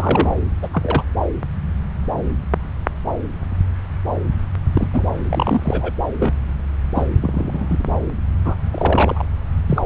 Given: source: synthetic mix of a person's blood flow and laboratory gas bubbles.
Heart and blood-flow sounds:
Doppler ultrasound of blood flow; subclavian vein
0.00-0.42 s: bubbles
0.62-0.69 s: bubbles
0.73-1.02 s: bubbles
4.74-4.88 s: bubbles
4.93-5.12 s: bubbles
5.27-5.91 s: bubbles
6.19-6.33 s: bubbles
6.95-7.09 s: bubbles
7.22-7.83 s: bubbles
8.46-8.55 s: bubbles
8.72-9.25 s: bubbles
9.66-9.82 s: bubbles
From the record:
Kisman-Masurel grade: 232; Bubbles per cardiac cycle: several, 3 to 8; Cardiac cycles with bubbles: 50 to 99%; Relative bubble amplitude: moderate (0.250 to 0.450); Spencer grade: 3 (all of the cardiac periods contain showers or single bubble signals, but not dominating or overriding the cardiac motion signals); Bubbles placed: anywhere in the cardiac cycle

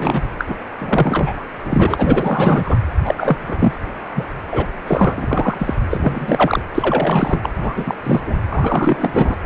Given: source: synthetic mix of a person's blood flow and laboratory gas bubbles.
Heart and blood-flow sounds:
Doppler ultrasound of blood flow; precordium
0.00-0.21 s: bubbles
0.38-0.45 s: bubbles
0.47-0.54 s: bubbles
0.78-1.45 s: bubbles
1.64-2.77 s: bubbles
3.04-3.38 s: bubbles
3.48-3.73 s: bubbles
4.15-4.25 s: bubbles
4.51-4.65 s: bubbles
4.87-5.75 s: bubbles
5.91-6.62 s: bubbles
6.74-7.50 s: bubbles
7.61-7.74 s: bubbles
7.76-7.95 s: bubbles
8.03-8.21 s: bubbles
8.26-8.37 s: bubbles
8.48-9.35 s: bubbles
From the record:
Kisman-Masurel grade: 343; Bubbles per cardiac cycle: rolling drumbeat, 9 or more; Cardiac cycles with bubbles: 100%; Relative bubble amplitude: loud (0.450 to 0.775); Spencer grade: 3 (all of the cardiac periods contain showers or single bubble signals, but not dominating or overriding the cardiac motion signals); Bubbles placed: anywhere in the cardiac cycle

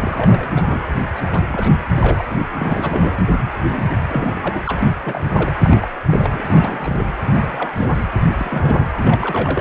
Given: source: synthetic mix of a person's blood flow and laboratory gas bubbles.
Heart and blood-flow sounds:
Doppler ultrasound of blood flow; precordium
0.00-0.50 s: bubbles
0.56-0.91 s: bubbles
1.17-1.40 s: bubbles
1.49-1.78 s: bubbles
1.95-2.23 s: bubbles
2.30-2.46 s: bubbles
2.54-3.21 s: bubbles
3.71-3.88 s: bubbles
4.08-4.60 s: bubbles
4.66-4.80 s: bubbles
4.83-4.93 s: bubbles
5.04-5.54 s: bubbles
5.63-5.88 s: bubbles
6.06-6.42 s: bubbles
6.46-7.07 s: bubbles
7.26-8.06 s: bubbles
8.19-8.22 s: bubbles
8.29-8.86 s: bubbles
9.03-9.61 s: bubbles
From the record:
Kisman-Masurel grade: 342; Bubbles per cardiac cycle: rolling drumbeat, 9 or more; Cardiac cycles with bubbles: 100%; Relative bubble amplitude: moderate (0.250 to 0.450); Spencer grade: 3 (all of the cardiac periods contain showers or single bubble signals, but not dominating or overriding the cardiac motion signals); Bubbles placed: anywhere in the cardiac cycle

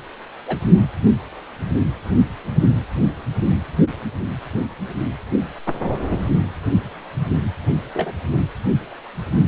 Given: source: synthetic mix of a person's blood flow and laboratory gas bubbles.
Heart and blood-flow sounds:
Doppler ultrasound of blood flow; precordium
0.47-0.58 s: bubbles
7.93-8.12 s: bubbles
From the record:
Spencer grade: 2 (many but less than half of the cardiac periods contain bubble signals, singularly or in groups); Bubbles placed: anywhere in the cardiac cycle

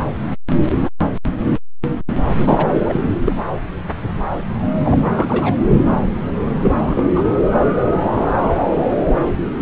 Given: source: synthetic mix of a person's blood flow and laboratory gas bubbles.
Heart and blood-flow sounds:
Doppler ultrasound of blood flow; subclavian vein
2.40-2.67 s: bubbles
2.85-3.01 s: bubbles
3.24-3.33 s: bubbles
4.84-5.05 s: bubbles
5.15-5.55 s: bubbles
6.62-7.04 s: bubbles
7.15-7.24 s: bubbles
From the record:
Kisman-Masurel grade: 222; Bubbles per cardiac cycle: several, 3 to 8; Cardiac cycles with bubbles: 10 to 50%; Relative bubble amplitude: moderate (0.250 to 0.450); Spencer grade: 2 (many but less than half of the cardiac periods contain bubble signals, singularly or in groups); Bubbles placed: anywhere in the cardiac cycle

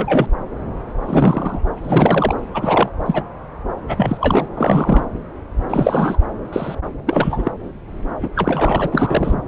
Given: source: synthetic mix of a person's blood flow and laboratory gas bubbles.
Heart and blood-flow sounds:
Doppler ultrasound of blood flow; subclavian vein
0.00-0.26 s: bubbles
1.05-1.60 s: bubbles
1.82-2.35 s: bubbles
2.54-2.89 s: bubbles
3.06-3.23 s: bubbles
3.89-4.17 s: bubbles
4.20-4.46 s: bubbles
4.55-5.07 s: bubbles
5.68-6.17 s: bubbles
6.52-6.75 s: bubbles
7.06-7.51 s: bubbles
8.22-8.28 s: bubbles
8.35-9.36 s: bubbles
From the record:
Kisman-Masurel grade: 333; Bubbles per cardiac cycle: rolling drumbeat, 9 or more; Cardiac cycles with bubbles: 50 to 99%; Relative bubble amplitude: loud (0.450 to 0.775); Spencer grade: 3 (all of the cardiac periods contain showers or single bubble signals, but not dominating or overriding the cardiac motion signals); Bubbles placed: anywhere in the cardiac cycle

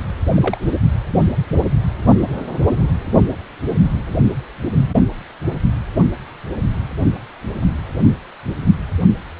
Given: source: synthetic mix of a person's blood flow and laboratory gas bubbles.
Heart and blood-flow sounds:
Doppler ultrasound of blood flow; precordium
0.35-0.57 s: bubbles
From the record:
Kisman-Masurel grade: 212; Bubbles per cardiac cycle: several, 3 to 8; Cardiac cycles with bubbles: 1 to 10%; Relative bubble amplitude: moderate (0.250 to 0.450); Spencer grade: 1 (occasional bubble signal discernible with the cardiac motion signal, with majority of cardiac periods free of bubbles); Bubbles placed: only in the low amplitude regions of the cardiac cycle

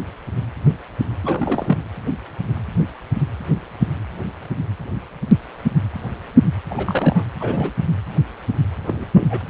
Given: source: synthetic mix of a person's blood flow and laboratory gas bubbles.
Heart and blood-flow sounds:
Doppler ultrasound of blood flow; precordium
1.23-1.83 s: bubbles
6.71-7.25 s: bubbles
7.39-7.73 s: bubbles
8.87-9.05 s: bubbles
9.13-9.28 s: bubbles
9.30-9.41 s: bubbles
From the record:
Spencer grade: 2 (many but less than half of the cardiac periods contain bubble signals, singularly or in groups); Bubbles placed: anywhere in the cardiac cycle

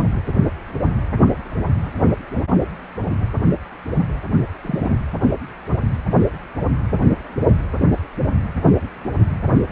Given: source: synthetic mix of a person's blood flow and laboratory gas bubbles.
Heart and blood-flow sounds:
Doppler ultrasound of blood flow; precordium
4.62-5.00 s: bubbles
From the record:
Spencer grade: 1 (occasional bubble signal discernible with the cardiac motion signal, with majority of cardiac periods free of bubbles); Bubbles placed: only in the low amplitude regions of the cardiac cycle

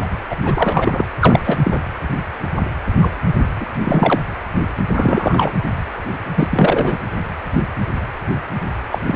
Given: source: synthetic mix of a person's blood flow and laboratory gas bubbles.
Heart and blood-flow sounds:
Doppler ultrasound of blood flow; precordium
0.00-0.07 s: bubbles
0.30-0.36 s: bubbles
0.43-1.04 s: bubbles
1.20-1.58 s: bubbles
1.63-1.79 s: bubbles
3.01-3.10 s: bubbles
3.36-3.46 s: bubbles
3.60-3.66 s: bubbles
3.84-4.20 s: bubbles
4.96-5.53 s: bubbles
6.35-6.98 s: bubbles
8.91-8.98 s: bubbles
9.06-9.16 s: bubbles
From the record:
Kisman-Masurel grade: 333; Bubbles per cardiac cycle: rolling drumbeat, 9 or more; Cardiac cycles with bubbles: 50 to 99%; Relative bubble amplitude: loud (0.450 to 0.775); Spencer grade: 3 (all of the cardiac periods contain showers or single bubble signals, but not dominating or overriding the cardiac motion signals); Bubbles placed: anywhere in the cardiac cycle

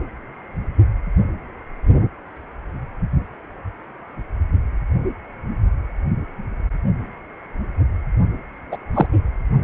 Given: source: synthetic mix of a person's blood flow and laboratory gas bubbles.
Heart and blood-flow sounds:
Doppler ultrasound of blood flow; precordium
8.71-8.78 s: bubbles
8.93-9.06 s: bubbles
From the record:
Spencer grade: 2 (many but less than half of the cardiac periods contain bubble signals, singularly or in groups); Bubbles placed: only in the low amplitude regions of the cardiac cycle

